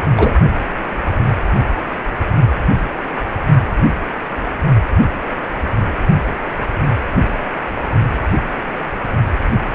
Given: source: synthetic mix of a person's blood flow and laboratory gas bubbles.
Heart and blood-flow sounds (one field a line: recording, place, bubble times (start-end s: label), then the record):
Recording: Doppler ultrasound of blood flow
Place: precordium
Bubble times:
0.00-0.04 s: bubbles
0.16-0.33 s: bubbles
From the record:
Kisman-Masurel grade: 213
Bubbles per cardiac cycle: several, 3 to 8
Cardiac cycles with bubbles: 1 to 10%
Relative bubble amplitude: loud (0.450 to 0.775)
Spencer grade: 1 (occasional bubble signal discernible with the cardiac motion signal, with majority of cardiac periods free of bubbles)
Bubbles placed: only in the low amplitude regions of the cardiac cycle